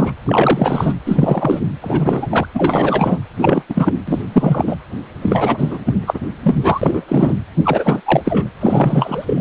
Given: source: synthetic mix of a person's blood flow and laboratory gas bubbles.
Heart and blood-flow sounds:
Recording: Doppler ultrasound of blood flow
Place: precordium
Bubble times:
0.00-0.12 s: bubbles
0.26-0.93 s: bubbles
1.05-1.60 s: bubbles
1.81-2.26 s: bubbles
2.29-2.47 s: bubbles
2.54-3.19 s: bubbles
3.39-3.62 s: bubbles
3.68-3.93 s: bubbles
4.08-4.21 s: bubbles
4.33-4.76 s: bubbles
5.21-5.79 s: bubbles
5.85-6.19 s: bubbles
6.43-7.03 s: bubbles
7.08-7.35 s: bubbles
7.64-8.01 s: bubbles
8.06-8.22 s: bubbles
8.25-8.49 s: bubbles
8.60-9.41 s: bubbles
From the record:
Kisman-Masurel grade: 343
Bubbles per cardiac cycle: rolling drumbeat, 9 or more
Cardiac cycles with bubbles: 100%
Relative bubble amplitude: loud (0.450 to 0.775)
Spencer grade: 3 (all of the cardiac periods contain showers or single bubble signals, but not dominating or overriding the cardiac motion signals)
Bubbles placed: anywhere in the cardiac cycle

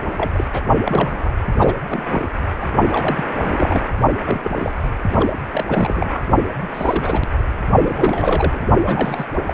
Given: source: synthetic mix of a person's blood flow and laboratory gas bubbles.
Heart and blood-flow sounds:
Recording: Doppler ultrasound of blood flow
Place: precordium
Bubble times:
0.17-0.31 s: bubbles
0.34-0.45 s: bubbles
0.53-0.61 s: bubbles
0.85-1.30 s: bubbles
1.56-1.75 s: bubbles
1.87-2.29 s: bubbles
2.60-2.68 s: bubbles
2.90-3.23 s: bubbles
3.41-3.81 s: bubbles
4.24-4.74 s: bubbles
5.08-5.30 s: bubbles
5.52-5.65 s: bubbles
5.68-6.21 s: bubbles
6.60-6.71 s: bubbles
6.74-7.24 s: bubbles
7.73-8.67 s: bubbles
8.84-9.26 s: bubbles
9.47-9.54 s: bubbles
From the record:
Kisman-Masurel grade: 342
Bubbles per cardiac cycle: rolling drumbeat, 9 or more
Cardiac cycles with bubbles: 100%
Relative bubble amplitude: moderate (0.250 to 0.450)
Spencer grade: 3 (all of the cardiac periods contain showers or single bubble signals, but not dominating or overriding the cardiac motion signals)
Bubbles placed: only in the low amplitude regions of the cardiac cycle

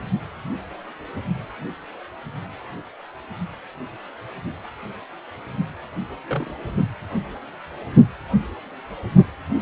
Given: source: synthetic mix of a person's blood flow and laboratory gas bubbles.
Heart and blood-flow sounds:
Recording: Doppler ultrasound of blood flow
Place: precordium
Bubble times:
6.29-6.54 s: bubbles
From the record:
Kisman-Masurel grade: 122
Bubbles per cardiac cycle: 1 to 2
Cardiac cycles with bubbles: 10 to 50%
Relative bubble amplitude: moderate (0.250 to 0.450)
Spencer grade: 2 (many but less than half of the cardiac periods contain bubble signals, singularly or in groups)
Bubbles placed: only in the low amplitude regions of the cardiac cycle

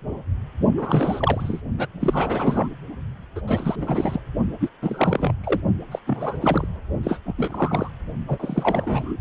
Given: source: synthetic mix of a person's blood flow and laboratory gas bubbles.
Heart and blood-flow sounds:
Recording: Doppler ultrasound of blood flow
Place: precordium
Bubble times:
0.77-1.61 s: bubbles
1.78-1.88 s: bubbles
1.99-2.68 s: bubbles
3.36-3.41 s: bubbles
3.47-4.20 s: bubbles
4.60-4.69 s: bubbles
4.81-5.33 s: bubbles
5.43-5.60 s: bubbles
5.91-5.99 s: bubbles
6.06-6.38 s: bubbles
6.41-6.67 s: bubbles
7.03-7.19 s: bubbles
7.25-7.33 s: bubbles
7.38-7.90 s: bubbles
8.28-9.17 s: bubbles
From the record:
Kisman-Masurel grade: 332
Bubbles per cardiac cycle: rolling drumbeat, 9 or more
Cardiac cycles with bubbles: 50 to 99%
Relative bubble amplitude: moderate (0.250 to 0.450)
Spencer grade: 3 (all of the cardiac periods contain showers or single bubble signals, but not dominating or overriding the cardiac motion signals)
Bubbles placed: only in the low amplitude regions of the cardiac cycle

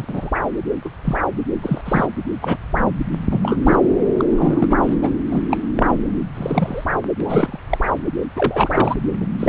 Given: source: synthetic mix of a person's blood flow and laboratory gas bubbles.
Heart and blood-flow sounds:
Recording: Doppler ultrasound of blood flow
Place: subclavian vein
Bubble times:
0.00-0.05 s: bubbles
0.08-0.30 s: bubbles
0.84-0.90 s: bubbles
1.04-1.17 s: bubbles
1.62-1.81 s: bubbles
1.85-2.06 s: bubbles
2.41-2.58 s: bubbles
3.30-3.58 s: bubbles
3.65-3.77 s: bubbles
4.18-4.24 s: bubbles
4.29-4.76 s: bubbles
4.81-4.95 s: bubbles
5.01-5.09 s: bubbles
5.29-5.42 s: bubbles
5.50-5.57 s: bubbles
5.76-5.96 s: bubbles
6.34-6.84 s: bubbles
7.20-7.58 s: bubbles
7.69-7.78 s: bubbles
8.36-8.96 s: bubbles
9.21-9.26 s: bubbles
9.39-9.49 s: bubbles
From the record:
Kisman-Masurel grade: 243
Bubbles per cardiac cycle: several, 3 to 8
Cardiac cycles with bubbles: 100%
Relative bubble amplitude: loud (0.450 to 0.775)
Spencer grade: 3 (all of the cardiac periods contain showers or single bubble signals, but not dominating or overriding the cardiac motion signals)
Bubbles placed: anywhere in the cardiac cycle

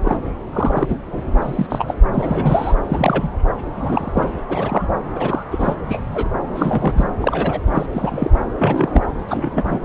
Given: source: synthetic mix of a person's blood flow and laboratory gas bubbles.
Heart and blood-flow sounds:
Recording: Doppler ultrasound of blood flow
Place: subclavian vein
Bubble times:
0.05-0.18 s: bubbles
0.53-0.96 s: bubbles
1.07-1.23 s: bubbles
1.42-1.66 s: bubbles
1.70-1.95 s: bubbles
2.14-2.75 s: bubbles
2.89-3.29 s: bubbles
3.76-4.29 s: bubbles
4.49-4.87 s: bubbles
5.14-5.44 s: bubbles
5.51-5.75 s: bubbles
5.88-6.01 s: bubbles
6.13-6.29 s: bubbles
6.54-7.05 s: bubbles
7.21-7.60 s: bubbles
7.74-7.87 s: bubbles
7.93-8.30 s: bubbles
8.58-9.01 s: bubbles
9.28-9.79 s: bubbles
From the record:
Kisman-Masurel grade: 242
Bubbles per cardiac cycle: several, 3 to 8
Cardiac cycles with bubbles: 100%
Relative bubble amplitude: moderate (0.250 to 0.450)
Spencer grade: 3 (all of the cardiac periods contain showers or single bubble signals, but not dominating or overriding the cardiac motion signals)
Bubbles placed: anywhere in the cardiac cycle

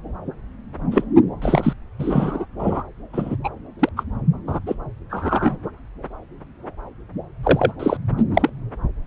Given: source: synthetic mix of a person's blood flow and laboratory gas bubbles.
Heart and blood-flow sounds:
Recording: Doppler ultrasound of blood flow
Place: subclavian vein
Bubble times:
0.92-1.03 s: bubbles
1.42-1.73 s: bubbles
1.99-2.45 s: bubbles
2.59-2.83 s: bubbles
3.13-3.36 s: bubbles
3.44-3.49 s: bubbles
3.79-3.89 s: bubbles
3.96-4.04 s: bubbles
4.47-4.60 s: bubbles
4.67-4.75 s: bubbles
5.09-5.57 s: bubbles
7.43-7.71 s: bubbles
7.79-7.97 s: bubbles
8.17-8.22 s: bubbles
8.33-8.49 s: bubbles
From the record:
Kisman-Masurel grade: 233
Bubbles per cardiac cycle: several, 3 to 8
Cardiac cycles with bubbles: 50 to 99%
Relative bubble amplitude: loud (0.450 to 0.775)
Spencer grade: 3 (all of the cardiac periods contain showers or single bubble signals, but not dominating or overriding the cardiac motion signals)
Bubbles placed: anywhere in the cardiac cycle

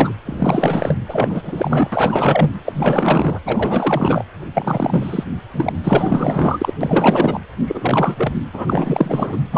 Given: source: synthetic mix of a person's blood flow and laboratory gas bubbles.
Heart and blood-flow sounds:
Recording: Doppler ultrasound of blood flow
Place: precordium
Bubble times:
0.00-0.12 s: bubbles
0.25-0.97 s: bubbles
1.08-2.54 s: bubbles
2.65-3.40 s: bubbles
3.44-4.24 s: bubbles
4.54-5.24 s: bubbles
5.53-5.71 s: bubbles
5.83-6.74 s: bubbles
6.80-7.39 s: bubbles
7.67-8.33 s: bubbles
8.53-9.37 s: bubbles
9.52-9.58 s: bubbles
From the record:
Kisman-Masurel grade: 444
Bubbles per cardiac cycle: continuous sound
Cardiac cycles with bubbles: 100%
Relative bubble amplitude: maximal (0.775 to 0.999)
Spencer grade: 4 (maximum detectable bubble signal sounding continuously throughout systole and diastole of every cardiac period, and overriding the amplitude of the normal cardiac signals)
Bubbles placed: anywhere in the cardiac cycle

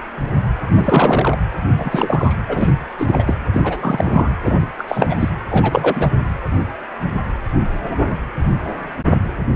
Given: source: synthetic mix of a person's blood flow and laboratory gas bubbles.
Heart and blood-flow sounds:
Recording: Doppler ultrasound of blood flow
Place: precordium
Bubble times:
0.74-1.38 s: bubbles
1.63-2.35 s: bubbles
2.48-2.71 s: bubbles
2.98-3.42 s: bubbles
3.54-4.30 s: bubbles
4.43-4.57 s: bubbles
4.62-4.67 s: bubbles
4.78-4.84 s: bubbles
4.88-5.17 s: bubbles
5.19-5.29 s: bubbles
5.50-6.07 s: bubbles
From the record:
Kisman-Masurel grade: 333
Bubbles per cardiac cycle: rolling drumbeat, 9 or more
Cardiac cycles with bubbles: 50 to 99%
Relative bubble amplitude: loud (0.450 to 0.775)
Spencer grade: 3 (all of the cardiac periods contain showers or single bubble signals, but not dominating or overriding the cardiac motion signals)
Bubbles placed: anywhere in the cardiac cycle

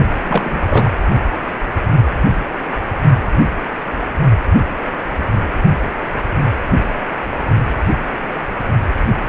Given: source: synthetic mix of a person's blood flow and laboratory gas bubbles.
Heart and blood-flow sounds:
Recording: Doppler ultrasound of blood flow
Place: precordium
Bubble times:
0.24-0.62 s: bubbles
0.68-0.90 s: bubbles
From the record:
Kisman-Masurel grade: 212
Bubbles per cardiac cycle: several, 3 to 8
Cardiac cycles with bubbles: 1 to 10%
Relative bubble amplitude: moderate (0.250 to 0.450)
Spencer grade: 1 (occasional bubble signal discernible with the cardiac motion signal, with majority of cardiac periods free of bubbles)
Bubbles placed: only in the low amplitude regions of the cardiac cycle

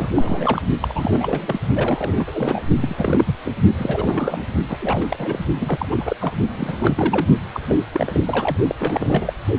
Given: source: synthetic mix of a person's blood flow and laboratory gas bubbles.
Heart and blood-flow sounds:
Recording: Doppler ultrasound of blood flow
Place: precordium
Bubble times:
0.00-0.08 s: bubbles
0.15-0.62 s: bubbles
0.79-1.59 s: bubbles
1.73-2.62 s: bubbles
2.80-3.35 s: bubbles
3.44-3.52 s: bubbles
3.78-4.43 s: bubbles
4.68-5.40 s: bubbles
5.60-5.88 s: bubbles
5.91-6.16 s: bubbles
6.21-6.33 s: bubbles
6.54-7.28 s: bubbles
7.53-7.60 s: bubbles
7.68-7.78 s: bubbles
7.93-8.58 s: bubbles
8.69-8.75 s: bubbles
8.79-9.33 s: bubbles
From the record:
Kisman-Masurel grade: 342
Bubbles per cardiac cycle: rolling drumbeat, 9 or more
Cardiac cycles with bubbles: 100%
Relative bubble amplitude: moderate (0.250 to 0.450)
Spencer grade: 3 (all of the cardiac periods contain showers or single bubble signals, but not dominating or overriding the cardiac motion signals)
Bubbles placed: only in the low amplitude regions of the cardiac cycle

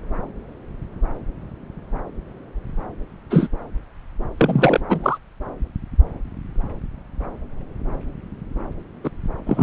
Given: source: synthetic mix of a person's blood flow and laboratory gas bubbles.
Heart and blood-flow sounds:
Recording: Doppler ultrasound of blood flow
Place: subclavian vein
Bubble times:
3.30-3.48 s: bubbles
4.37-4.80 s: bubbles
4.89-5.18 s: bubbles
9.04-9.10 s: bubbles
9.46-9.63 s: bubbles
From the record:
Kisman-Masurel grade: 123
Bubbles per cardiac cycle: 1 to 2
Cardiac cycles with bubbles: 10 to 50%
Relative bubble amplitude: loud (0.450 to 0.775)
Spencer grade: 2 (many but less than half of the cardiac periods contain bubble signals, singularly or in groups)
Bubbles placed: anywhere in the cardiac cycle

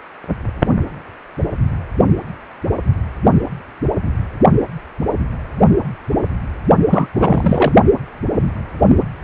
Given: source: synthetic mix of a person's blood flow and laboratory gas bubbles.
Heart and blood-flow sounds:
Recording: Doppler ultrasound of blood flow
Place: precordium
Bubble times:
6.89-7.07 s: bubbles
7.14-7.72 s: bubbles
From the record:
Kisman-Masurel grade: 213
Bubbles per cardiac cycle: several, 3 to 8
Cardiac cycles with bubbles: 1 to 10%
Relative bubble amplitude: loud (0.450 to 0.775)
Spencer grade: 1 (occasional bubble signal discernible with the cardiac motion signal, with majority of cardiac periods free of bubbles)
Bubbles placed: only in the low amplitude regions of the cardiac cycle

